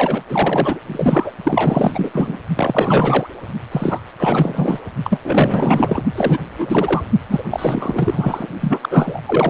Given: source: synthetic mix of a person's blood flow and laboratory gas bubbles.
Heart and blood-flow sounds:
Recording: Doppler ultrasound of blood flow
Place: precordium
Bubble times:
0.00-0.23 s: bubbles
0.29-0.80 s: bubbles
0.87-1.31 s: bubbles
1.44-2.39 s: bubbles
2.56-3.27 s: bubbles
3.71-4.01 s: bubbles
4.17-4.79 s: bubbles
5.04-5.19 s: bubbles
5.22-6.04 s: bubbles
6.15-6.38 s: bubbles
6.58-7.01 s: bubbles
7.29-7.44 s: bubbles
7.50-8.47 s: bubbles
8.60-8.79 s: bubbles
8.82-9.21 s: bubbles
9.26-9.50 s: bubbles
From the record:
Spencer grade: 4 (maximum detectable bubble signal sounding continuously throughout systole and diastole of every cardiac period, and overriding the amplitude of the normal cardiac signals)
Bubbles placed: only in the low amplitude regions of the cardiac cycle

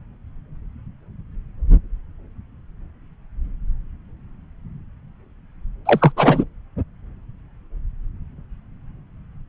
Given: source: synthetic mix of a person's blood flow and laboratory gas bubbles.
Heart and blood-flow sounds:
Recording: Doppler ultrasound of blood flow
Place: subclavian vein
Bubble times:
5.85-6.12 s: bubbles
6.17-6.45 s: bubbles
From the record:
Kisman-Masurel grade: 213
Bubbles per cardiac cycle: several, 3 to 8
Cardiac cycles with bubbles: 1 to 10%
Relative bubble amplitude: loud (0.450 to 0.775)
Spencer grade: 1 (occasional bubble signal discernible with the cardiac motion signal, with majority of cardiac periods free of bubbles)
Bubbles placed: anywhere in the cardiac cycle

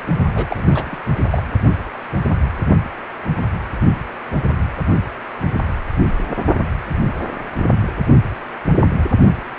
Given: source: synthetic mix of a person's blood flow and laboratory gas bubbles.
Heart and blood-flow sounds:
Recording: Doppler ultrasound of blood flow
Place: precordium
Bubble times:
0.34-1.04 s: bubbles
1.30-1.42 s: bubbles
From the record:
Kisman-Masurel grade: 222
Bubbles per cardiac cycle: several, 3 to 8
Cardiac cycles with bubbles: 10 to 50%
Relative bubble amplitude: moderate (0.250 to 0.450)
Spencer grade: 2 (many but less than half of the cardiac periods contain bubble signals, singularly or in groups)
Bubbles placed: only in the low amplitude regions of the cardiac cycle

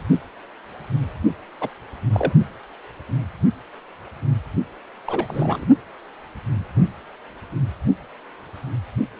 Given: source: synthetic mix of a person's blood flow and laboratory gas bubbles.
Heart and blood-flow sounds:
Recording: Doppler ultrasound of blood flow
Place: precordium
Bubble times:
1.60-1.70 s: bubbles
2.12-2.33 s: bubbles
5.05-5.66 s: bubbles
From the record:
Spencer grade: 2 (many but less than half of the cardiac periods contain bubble signals, singularly or in groups)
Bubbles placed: only in the low amplitude regions of the cardiac cycle

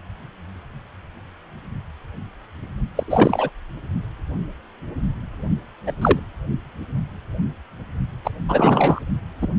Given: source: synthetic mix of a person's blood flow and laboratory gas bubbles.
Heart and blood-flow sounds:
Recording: Doppler ultrasound of blood flow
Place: precordium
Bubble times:
2.96-3.04 s: bubbles
3.08-3.50 s: bubbles
5.87-5.92 s: bubbles
6.01-6.20 s: bubbles
8.25-8.30 s: bubbles
8.48-9.01 s: bubbles
9.41-9.47 s: bubbles
From the record:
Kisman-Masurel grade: 223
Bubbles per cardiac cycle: several, 3 to 8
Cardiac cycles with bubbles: 10 to 50%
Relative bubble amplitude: loud (0.450 to 0.775)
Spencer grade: 2 (many but less than half of the cardiac periods contain bubble signals, singularly or in groups)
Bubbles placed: only in the low amplitude regions of the cardiac cycle

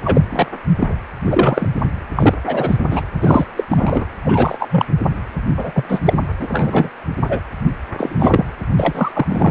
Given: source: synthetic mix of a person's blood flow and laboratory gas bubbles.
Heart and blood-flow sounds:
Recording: Doppler ultrasound of blood flow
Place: precordium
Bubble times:
0.04-0.21 s: bubbles
0.30-0.46 s: bubbles
0.80-0.96 s: bubbles
1.25-1.91 s: bubbles
2.16-2.34 s: bubbles
2.46-2.77 s: bubbles
2.90-3.03 s: bubbles
3.21-3.46 s: bubbles
3.56-3.64 s: bubbles
3.70-4.05 s: bubbles
4.22-4.86 s: bubbles
5.57-5.72 s: bubbles
5.75-5.84 s: bubbles
5.88-6.00 s: bubbles
6.05-6.14 s: bubbles
6.38-6.90 s: bubbles
7.29-7.40 s: bubbles
7.98-8.46 s: bubbles
8.77-9.26 s: bubbles
9.29-9.51 s: bubbles
From the record:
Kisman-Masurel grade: 243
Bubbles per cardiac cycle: several, 3 to 8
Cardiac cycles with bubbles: 100%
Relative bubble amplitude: loud (0.450 to 0.775)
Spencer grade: 3 (all of the cardiac periods contain showers or single bubble signals, but not dominating or overriding the cardiac motion signals)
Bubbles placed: anywhere in the cardiac cycle

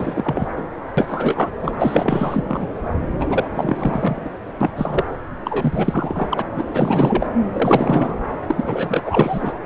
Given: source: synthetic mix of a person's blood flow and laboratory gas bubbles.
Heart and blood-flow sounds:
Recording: Doppler ultrasound of blood flow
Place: subclavian vein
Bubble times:
0.00-0.48 s: bubbles
0.57-0.62 s: bubbles
0.97-1.49 s: bubbles
1.61-1.72 s: bubbles
1.78-2.44 s: bubbles
2.48-2.67 s: bubbles
3.19-4.31 s: bubbles
4.61-5.04 s: bubbles
5.44-6.45 s: bubbles
6.54-6.63 s: bubbles
6.74-7.27 s: bubbles
7.53-8.16 s: bubbles
8.46-9.53 s: bubbles
From the record:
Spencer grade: 4 (maximum detectable bubble signal sounding continuously throughout systole and diastole of every cardiac period, and overriding the amplitude of the normal cardiac signals)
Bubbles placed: anywhere in the cardiac cycle

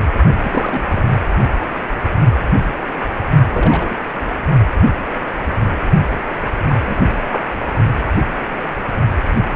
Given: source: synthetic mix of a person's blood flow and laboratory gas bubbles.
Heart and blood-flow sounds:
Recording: Doppler ultrasound of blood flow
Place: precordium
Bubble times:
0.43-1.13 s: bubbles
3.51-3.96 s: bubbles
6.68-7.14 s: bubbles
7.29-7.43 s: bubbles
From the record:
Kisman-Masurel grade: 222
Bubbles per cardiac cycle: several, 3 to 8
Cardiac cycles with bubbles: 10 to 50%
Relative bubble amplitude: moderate (0.250 to 0.450)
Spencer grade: 2 (many but less than half of the cardiac periods contain bubble signals, singularly or in groups)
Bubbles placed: only in the low amplitude regions of the cardiac cycle

